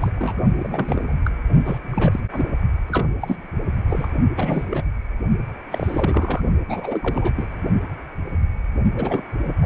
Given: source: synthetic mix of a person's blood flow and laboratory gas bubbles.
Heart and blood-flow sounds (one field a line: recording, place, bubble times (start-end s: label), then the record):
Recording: Doppler ultrasound of blood flow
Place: precordium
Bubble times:
0.01-0.13 s: bubbles
0.16-0.43 s: bubbles
0.58-1.20 s: bubbles
1.24-1.30 s: bubbles
1.64-1.78 s: bubbles
1.92-2.19 s: bubbles
2.33-2.48 s: bubbles
2.88-3.08 s: bubbles
3.21-3.47 s: bubbles
3.88-4.08 s: bubbles
4.36-4.83 s: bubbles
5.71-6.41 s: bubbles
6.68-7.46 s: bubbles
8.96-9.22 s: bubbles
9.45-9.51 s: bubbles
9.62-9.66 s: bubbles
From the record:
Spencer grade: 3 (all of the cardiac periods contain showers or single bubble signals, but not dominating or overriding the cardiac motion signals)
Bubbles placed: only in the low amplitude regions of the cardiac cycle